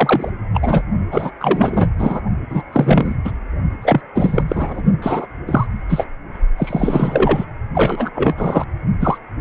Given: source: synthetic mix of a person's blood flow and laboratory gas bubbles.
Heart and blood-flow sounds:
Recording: Doppler ultrasound of blood flow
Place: precordium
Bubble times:
0.00-0.32 s: bubbles
0.54-0.82 s: bubbles
1.11-1.31 s: bubbles
1.40-1.90 s: bubbles
1.98-2.21 s: bubbles
2.50-2.62 s: bubbles
2.73-3.16 s: bubbles
3.24-3.32 s: bubbles
3.82-4.01 s: bubbles
4.14-4.42 s: bubbles
4.48-4.82 s: bubbles
5.02-5.27 s: bubbles
5.47-5.67 s: bubbles
5.88-6.04 s: bubbles
6.57-7.45 s: bubbles
7.73-8.11 s: bubbles
8.14-8.64 s: bubbles
8.99-9.18 s: bubbles
From the record:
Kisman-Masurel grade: 343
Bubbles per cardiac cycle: rolling drumbeat, 9 or more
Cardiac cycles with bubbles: 100%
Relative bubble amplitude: loud (0.450 to 0.775)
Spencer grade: 3 (all of the cardiac periods contain showers or single bubble signals, but not dominating or overriding the cardiac motion signals)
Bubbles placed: only in the low amplitude regions of the cardiac cycle

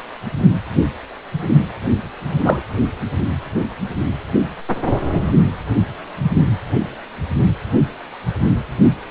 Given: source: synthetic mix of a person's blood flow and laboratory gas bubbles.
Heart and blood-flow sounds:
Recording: Doppler ultrasound of blood flow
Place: precordium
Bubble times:
2.44-2.60 s: bubbles
From the record:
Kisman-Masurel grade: 113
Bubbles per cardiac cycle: 1 to 2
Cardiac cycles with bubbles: 1 to 10%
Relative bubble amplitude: loud (0.450 to 0.775)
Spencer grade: 1 (occasional bubble signal discernible with the cardiac motion signal, with majority of cardiac periods free of bubbles)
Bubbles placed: anywhere in the cardiac cycle

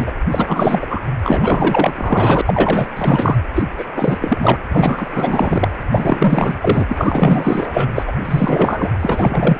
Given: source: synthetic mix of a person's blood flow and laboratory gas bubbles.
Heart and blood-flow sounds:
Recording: Doppler ultrasound of blood flow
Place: precordium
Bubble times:
0.00-0.12 s: bubbles
0.29-0.87 s: bubbles
0.89-1.01 s: bubbles
1.24-1.93 s: bubbles
1.95-2.42 s: bubbles
2.46-2.87 s: bubbles
2.95-3.35 s: bubbles
3.54-3.63 s: bubbles
3.77-3.85 s: bubbles
3.96-4.17 s: bubbles
4.21-4.58 s: bubbles
4.70-5.70 s: bubbles
5.92-6.58 s: bubbles
6.60-6.85 s: bubbles
6.88-7.88 s: bubbles
7.95-8.04 s: bubbles
8.07-8.12 s: bubbles
8.25-8.91 s: bubbles
8.99-9.60 s: bubbles
From the record:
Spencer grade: 4 (maximum detectable bubble signal sounding continuously throughout systole and diastole of every cardiac period, and overriding the amplitude of the normal cardiac signals)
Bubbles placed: anywhere in the cardiac cycle

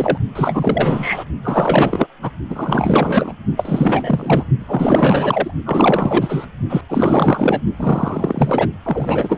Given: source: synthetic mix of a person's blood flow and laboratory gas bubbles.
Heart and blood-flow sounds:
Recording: Doppler ultrasound of blood flow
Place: precordium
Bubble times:
0.00-0.17 s: bubbles
0.35-1.24 s: bubbles
1.43-2.07 s: bubbles
2.22-2.31 s: bubbles
2.50-3.33 s: bubbles
3.56-4.44 s: bubbles
4.59-5.51 s: bubbles
5.66-6.46 s: bubbles
6.69-6.82 s: bubbles
6.89-7.62 s: bubbles
7.77-8.68 s: bubbles
8.82-9.38 s: bubbles
From the record:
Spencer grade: 4 (maximum detectable bubble signal sounding continuously throughout systole and diastole of every cardiac period, and overriding the amplitude of the normal cardiac signals)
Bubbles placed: only in the low amplitude regions of the cardiac cycle

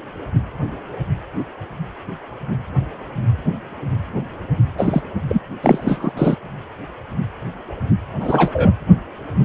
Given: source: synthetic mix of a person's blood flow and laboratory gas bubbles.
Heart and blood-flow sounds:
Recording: Doppler ultrasound of blood flow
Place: precordium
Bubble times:
4.78-5.02 s: bubbles
5.29-5.42 s: bubbles
5.62-6.12 s: bubbles
6.17-6.36 s: bubbles
8.20-8.71 s: bubbles
From the record:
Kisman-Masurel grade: 223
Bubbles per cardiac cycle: several, 3 to 8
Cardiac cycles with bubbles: 10 to 50%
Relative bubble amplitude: loud (0.450 to 0.775)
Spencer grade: 2 (many but less than half of the cardiac periods contain bubble signals, singularly or in groups)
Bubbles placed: anywhere in the cardiac cycle

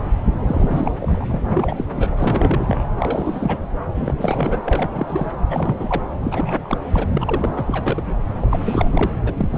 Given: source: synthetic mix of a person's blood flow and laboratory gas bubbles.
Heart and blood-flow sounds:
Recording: Doppler ultrasound of blood flow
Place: subclavian vein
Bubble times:
0.46-1.25 s: bubbles
1.29-1.40 s: bubbles
1.44-1.84 s: bubbles
1.92-2.08 s: bubbles
2.17-2.83 s: bubbles
2.98-3.60 s: bubbles
3.95-4.15 s: bubbles
4.18-4.62 s: bubbles
4.66-5.31 s: bubbles
5.50-6.02 s: bubbles
6.23-6.78 s: bubbles
6.92-7.06 s: bubbles
7.15-8.02 s: bubbles
8.40-9.11 s: bubbles
9.27-9.34 s: bubbles
9.37-9.58 s: bubbles
From the record:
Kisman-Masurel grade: 342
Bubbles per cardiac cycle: rolling drumbeat, 9 or more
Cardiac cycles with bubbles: 100%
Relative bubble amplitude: moderate (0.250 to 0.450)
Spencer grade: 3 (all of the cardiac periods contain showers or single bubble signals, but not dominating or overriding the cardiac motion signals)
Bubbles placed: anywhere in the cardiac cycle

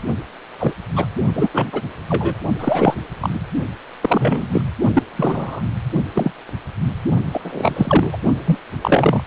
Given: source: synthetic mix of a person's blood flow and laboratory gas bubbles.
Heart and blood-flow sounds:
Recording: Doppler ultrasound of blood flow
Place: precordium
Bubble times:
0.58-0.73 s: bubbles
0.96-1.05 s: bubbles
1.34-1.48 s: bubbles
1.52-1.82 s: bubbles
2.09-2.34 s: bubbles
2.58-2.96 s: bubbles
3.20-3.29 s: bubbles
3.33-3.40 s: bubbles
4.01-4.49 s: bubbles
4.52-4.62 s: bubbles
4.93-5.03 s: bubbles
5.16-5.61 s: bubbles
6.15-6.32 s: bubbles
7.33-8.17 s: bubbles
8.45-8.58 s: bubbles
8.81-9.23 s: bubbles
From the record:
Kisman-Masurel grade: 243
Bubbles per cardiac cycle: several, 3 to 8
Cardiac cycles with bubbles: 100%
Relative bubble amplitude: loud (0.450 to 0.775)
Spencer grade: 3 (all of the cardiac periods contain showers or single bubble signals, but not dominating or overriding the cardiac motion signals)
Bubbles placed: only in the low amplitude regions of the cardiac cycle

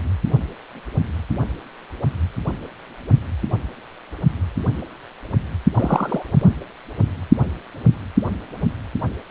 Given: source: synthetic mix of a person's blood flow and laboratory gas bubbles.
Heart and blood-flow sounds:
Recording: Doppler ultrasound of blood flow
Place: precordium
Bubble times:
5.74-6.22 s: bubbles
From the record:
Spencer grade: 2 (many but less than half of the cardiac periods contain bubble signals, singularly or in groups)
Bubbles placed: only in the low amplitude regions of the cardiac cycle

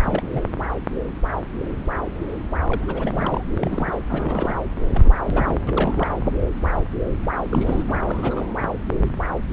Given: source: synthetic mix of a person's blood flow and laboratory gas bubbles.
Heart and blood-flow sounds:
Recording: Doppler ultrasound of blood flow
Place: subclavian vein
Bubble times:
0.02-0.50 s: bubbles
2.68-3.44 s: bubbles
3.57-3.98 s: bubbles
4.09-4.60 s: bubbles
4.91-5.10 s: bubbles
5.24-5.59 s: bubbles
5.67-6.08 s: bubbles
7.47-7.84 s: bubbles
7.87-7.98 s: bubbles
8.07-8.46 s: bubbles
From the record:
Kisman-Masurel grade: 332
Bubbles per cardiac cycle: rolling drumbeat, 9 or more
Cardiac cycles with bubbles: 50 to 99%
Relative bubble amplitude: moderate (0.250 to 0.450)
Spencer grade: 3 (all of the cardiac periods contain showers or single bubble signals, but not dominating or overriding the cardiac motion signals)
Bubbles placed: anywhere in the cardiac cycle

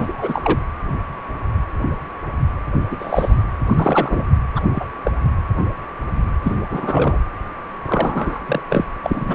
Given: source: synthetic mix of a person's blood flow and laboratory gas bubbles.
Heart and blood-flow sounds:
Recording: Doppler ultrasound of blood flow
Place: precordium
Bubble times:
0.00-0.59 s: bubbles
2.91-2.96 s: bubbles
2.99-3.43 s: bubbles
3.66-4.26 s: bubbles
4.55-4.61 s: bubbles
4.75-4.86 s: bubbles
5.04-5.11 s: bubbles
6.42-6.55 s: bubbles
6.70-7.20 s: bubbles
7.81-8.44 s: bubbles
8.46-8.62 s: bubbles
8.70-8.85 s: bubbles
9.04-9.35 s: bubbles
From the record:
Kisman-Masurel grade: 232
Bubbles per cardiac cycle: several, 3 to 8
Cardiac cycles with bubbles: 50 to 99%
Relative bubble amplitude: moderate (0.250 to 0.450)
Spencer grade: 3 (all of the cardiac periods contain showers or single bubble signals, but not dominating or overriding the cardiac motion signals)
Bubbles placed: anywhere in the cardiac cycle

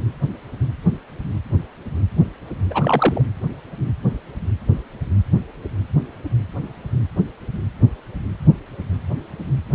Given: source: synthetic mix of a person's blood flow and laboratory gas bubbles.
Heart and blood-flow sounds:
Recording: Doppler ultrasound of blood flow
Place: precordium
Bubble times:
2.70-3.22 s: bubbles
From the record:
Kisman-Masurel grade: 113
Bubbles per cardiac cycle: 1 to 2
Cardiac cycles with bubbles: 1 to 10%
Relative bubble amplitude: loud (0.450 to 0.775)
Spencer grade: 1 (occasional bubble signal discernible with the cardiac motion signal, with majority of cardiac periods free of bubbles)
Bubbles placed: anywhere in the cardiac cycle

